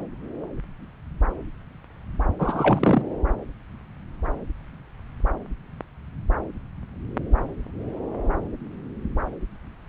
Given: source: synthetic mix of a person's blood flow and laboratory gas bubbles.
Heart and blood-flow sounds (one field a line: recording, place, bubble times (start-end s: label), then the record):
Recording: Doppler ultrasound of blood flow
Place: subclavian vein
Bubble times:
2.39-3.02 s: bubbles
From the record:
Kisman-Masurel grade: 213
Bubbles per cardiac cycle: several, 3 to 8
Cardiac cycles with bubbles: 1 to 10%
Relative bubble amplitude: loud (0.450 to 0.775)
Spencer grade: 1 (occasional bubble signal discernible with the cardiac motion signal, with majority of cardiac periods free of bubbles)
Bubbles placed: anywhere in the cardiac cycle